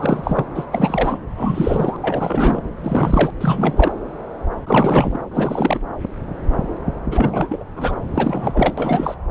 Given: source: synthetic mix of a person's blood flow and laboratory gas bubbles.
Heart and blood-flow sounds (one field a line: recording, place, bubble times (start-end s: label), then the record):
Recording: Doppler ultrasound of blood flow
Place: subclavian vein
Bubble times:
0.00-0.46 s: bubbles
0.55-0.65 s: bubbles
0.72-1.18 s: bubbles
1.36-1.97 s: bubbles
2.01-2.61 s: bubbles
2.76-3.30 s: bubbles
3.40-3.91 s: bubbles
4.67-5.18 s: bubbles
5.31-5.79 s: bubbles
7.11-7.63 s: bubbles
7.76-7.94 s: bubbles
8.14-9.16 s: bubbles
From the record:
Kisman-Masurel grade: 333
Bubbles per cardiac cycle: rolling drumbeat, 9 or more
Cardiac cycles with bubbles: 50 to 99%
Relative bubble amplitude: loud (0.450 to 0.775)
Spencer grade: 3 (all of the cardiac periods contain showers or single bubble signals, but not dominating or overriding the cardiac motion signals)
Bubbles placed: anywhere in the cardiac cycle